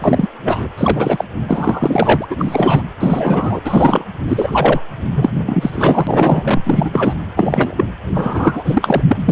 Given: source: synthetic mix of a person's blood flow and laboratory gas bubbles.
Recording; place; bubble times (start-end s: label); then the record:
Doppler ultrasound of blood flow; precordium
0.00-0.29 s: bubbles
0.43-0.68 s: bubbles
0.77-1.25 s: bubbles
1.48-2.26 s: bubbles
2.30-2.83 s: bubbles
3.00-3.60 s: bubbles
3.65-4.04 s: bubbles
4.27-4.81 s: bubbles
5.14-6.61 s: bubbles
6.64-7.14 s: bubbles
7.36-7.85 s: bubbles
8.14-9.02 s: bubbles
9.07-9.32 s: bubbles
From the record:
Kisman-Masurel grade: 343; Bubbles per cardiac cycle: rolling drumbeat, 9 or more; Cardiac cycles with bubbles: 100%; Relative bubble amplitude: loud (0.450 to 0.775); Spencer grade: 3 (all of the cardiac periods contain showers or single bubble signals, but not dominating or overriding the cardiac motion signals); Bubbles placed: anywhere in the cardiac cycle